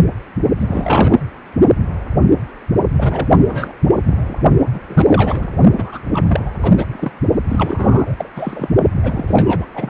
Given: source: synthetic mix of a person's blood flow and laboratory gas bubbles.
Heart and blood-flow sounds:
Doppler ultrasound of blood flow; precordium
0.58-1.23 s: bubbles
2.94-3.28 s: bubbles
3.31-3.39 s: bubbles
3.46-3.73 s: bubbles
4.05-4.42 s: bubbles
4.74-4.80 s: bubbles
4.88-5.48 s: bubbles
5.77-6.00 s: bubbles
6.12-6.51 s: bubbles
6.62-6.84 s: bubbles
6.93-7.12 s: bubbles
7.49-8.15 s: bubbles
8.18-8.30 s: bubbles
8.36-8.70 s: bubbles
8.97-9.25 s: bubbles
9.28-9.65 s: bubbles
9.74-9.90 s: bubbles
From the record:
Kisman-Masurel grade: 333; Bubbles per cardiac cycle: rolling drumbeat, 9 or more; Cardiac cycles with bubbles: 50 to 99%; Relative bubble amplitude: loud (0.450 to 0.775); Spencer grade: 3 (all of the cardiac periods contain showers or single bubble signals, but not dominating or overriding the cardiac motion signals); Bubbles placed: only in the low amplitude regions of the cardiac cycle

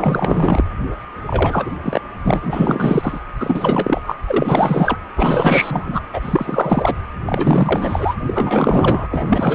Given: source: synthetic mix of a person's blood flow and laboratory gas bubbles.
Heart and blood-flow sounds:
Doppler ultrasound of blood flow; precordium
0.00-0.64 s: bubbles
1.26-1.71 s: bubbles
1.82-2.01 s: bubbles
2.23-3.20 s: bubbles
3.40-4.00 s: bubbles
4.06-4.15 s: bubbles
4.26-4.97 s: bubbles
5.15-6.00 s: bubbles
6.13-6.96 s: bubbles
7.25-8.15 s: bubbles
8.26-9.06 s: bubbles
9.11-9.55 s: bubbles
From the record:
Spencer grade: 4 (maximum detectable bubble signal sounding continuously throughout systole and diastole of every cardiac period, and overriding the amplitude of the normal cardiac signals); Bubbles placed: anywhere in the cardiac cycle

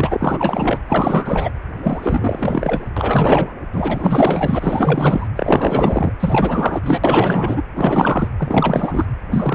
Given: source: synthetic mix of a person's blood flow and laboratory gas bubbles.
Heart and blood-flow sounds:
Doppler ultrasound of blood flow; precordium
0.00-0.78 s: bubbles
0.86-1.51 s: bubbles
1.82-2.88 s: bubbles
2.96-3.52 s: bubbles
3.72-5.28 s: bubbles
5.35-6.12 s: bubbles
6.20-7.00 s: bubbles
7.04-7.61 s: bubbles
7.75-8.28 s: bubbles
8.38-9.06 s: bubbles
9.31-9.55 s: bubbles
From the record:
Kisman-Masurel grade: 444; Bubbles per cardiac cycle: continuous sound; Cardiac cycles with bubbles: 100%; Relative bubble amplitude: maximal (0.775 to 0.999); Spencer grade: 4 (maximum detectable bubble signal sounding continuously throughout systole and diastole of every cardiac period, and overriding the amplitude of the normal cardiac signals); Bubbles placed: anywhere in the cardiac cycle

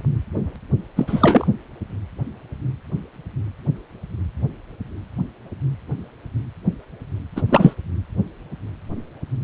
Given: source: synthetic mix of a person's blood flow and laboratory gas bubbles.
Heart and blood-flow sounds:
Doppler ultrasound of blood flow; precordium
0.96-1.47 s: bubbles
7.35-7.42 s: bubbles
7.50-7.74 s: bubbles
From the record:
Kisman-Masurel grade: 223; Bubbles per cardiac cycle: several, 3 to 8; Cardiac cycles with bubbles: 10 to 50%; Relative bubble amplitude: loud (0.450 to 0.775); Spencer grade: 2 (many but less than half of the cardiac periods contain bubble signals, singularly or in groups); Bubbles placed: anywhere in the cardiac cycle

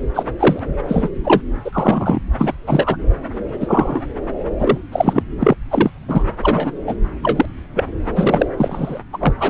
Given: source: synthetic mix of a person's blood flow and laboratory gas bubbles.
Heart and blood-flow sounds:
Doppler ultrasound of blood flow; subclavian vein
0.14-0.23 s: bubbles
0.39-0.59 s: bubbles
0.88-1.09 s: bubbles
1.23-1.43 s: bubbles
1.65-2.22 s: bubbles
2.38-2.54 s: bubbles
2.66-2.97 s: bubbles
3.60-4.01 s: bubbles
4.59-4.78 s: bubbles
4.92-5.22 s: bubbles
5.40-5.55 s: bubbles
5.70-5.90 s: bubbles
6.08-6.23 s: bubbles
6.42-6.71 s: bubbles
6.86-6.96 s: bubbles
7.23-7.46 s: bubbles
7.76-7.84 s: bubbles
8.15-8.46 s: bubbles
8.57-8.99 s: bubbles
9.12-9.34 s: bubbles
9.39-9.50 s: bubbles
From the record:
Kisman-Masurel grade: 243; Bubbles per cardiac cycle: several, 3 to 8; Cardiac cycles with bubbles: 100%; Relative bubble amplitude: loud (0.450 to 0.775); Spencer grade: 3 (all of the cardiac periods contain showers or single bubble signals, but not dominating or overriding the cardiac motion signals); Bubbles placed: anywhere in the cardiac cycle

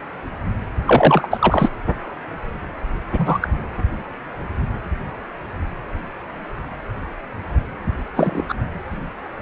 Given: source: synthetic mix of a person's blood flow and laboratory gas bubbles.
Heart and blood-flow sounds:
Doppler ultrasound of blood flow; precordium
0.85-1.70 s: bubbles
3.18-3.38 s: bubbles
3.42-3.49 s: bubbles
8.16-8.42 s: bubbles
8.49-8.54 s: bubbles
From the record:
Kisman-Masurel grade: 223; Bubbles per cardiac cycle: several, 3 to 8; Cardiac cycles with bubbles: 10 to 50%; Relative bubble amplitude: loud (0.450 to 0.775); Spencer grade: 2 (many but less than half of the cardiac periods contain bubble signals, singularly or in groups); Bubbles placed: anywhere in the cardiac cycle

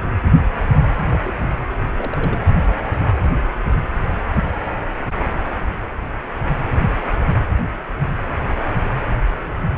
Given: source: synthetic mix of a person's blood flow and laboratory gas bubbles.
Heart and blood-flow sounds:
Doppler ultrasound of blood flow; precordium
1.12-1.16 s: bubbles
1.22-1.48 s: bubbles
1.97-2.37 s: bubbles
From the record:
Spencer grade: 2 (many but less than half of the cardiac periods contain bubble signals, singularly or in groups); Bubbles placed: anywhere in the cardiac cycle

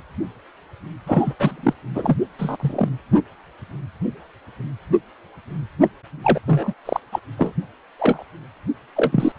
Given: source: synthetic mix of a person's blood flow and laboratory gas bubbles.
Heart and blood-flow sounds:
Doppler ultrasound of blood flow; precordium
1.06-1.34 s: bubbles
1.39-1.74 s: bubbles
1.95-2.17 s: bubbles
2.38-2.57 s: bubbles
2.60-2.88 s: bubbles
5.81-5.89 s: bubbles
6.24-6.40 s: bubbles
6.46-6.73 s: bubbles
6.85-7.00 s: bubbles
7.12-7.20 s: bubbles
7.37-7.53 s: bubbles
7.99-8.23 s: bubbles
8.96-9.32 s: bubbles
From the record:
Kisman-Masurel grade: 233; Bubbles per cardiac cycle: several, 3 to 8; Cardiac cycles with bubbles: 50 to 99%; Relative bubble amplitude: loud (0.450 to 0.775); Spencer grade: 3 (all of the cardiac periods contain showers or single bubble signals, but not dominating or overriding the cardiac motion signals); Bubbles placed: anywhere in the cardiac cycle

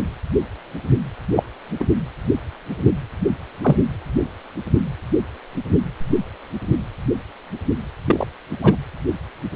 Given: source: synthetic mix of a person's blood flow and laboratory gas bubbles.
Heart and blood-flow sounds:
Doppler ultrasound of blood flow; precordium
1.35-1.44 s: bubbles
1.79-1.87 s: bubbles
3.62-3.76 s: bubbles
8.06-8.26 s: bubbles
8.61-8.75 s: bubbles
From the record:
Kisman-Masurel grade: 123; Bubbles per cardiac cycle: 1 to 2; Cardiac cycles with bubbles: 10 to 50%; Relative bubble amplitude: loud (0.450 to 0.775); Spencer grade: 2 (many but less than half of the cardiac periods contain bubble signals, singularly or in groups); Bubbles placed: anywhere in the cardiac cycle

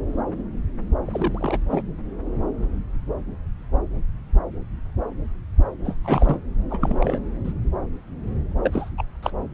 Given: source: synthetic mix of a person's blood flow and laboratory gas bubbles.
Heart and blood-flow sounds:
Doppler ultrasound of blood flow; subclavian vein
1.06-1.58 s: bubbles
1.70-1.82 s: bubbles
5.84-5.96 s: bubbles
6.04-6.38 s: bubbles
6.70-7.20 s: bubbles
7.44-7.53 s: bubbles
8.63-8.89 s: bubbles
8.97-9.03 s: bubbles
9.22-9.32 s: bubbles
From the record:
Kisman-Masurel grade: 222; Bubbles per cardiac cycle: several, 3 to 8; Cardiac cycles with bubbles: 10 to 50%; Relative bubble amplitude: moderate (0.250 to 0.450); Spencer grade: 2 (many but less than half of the cardiac periods contain bubble signals, singularly or in groups); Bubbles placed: anywhere in the cardiac cycle

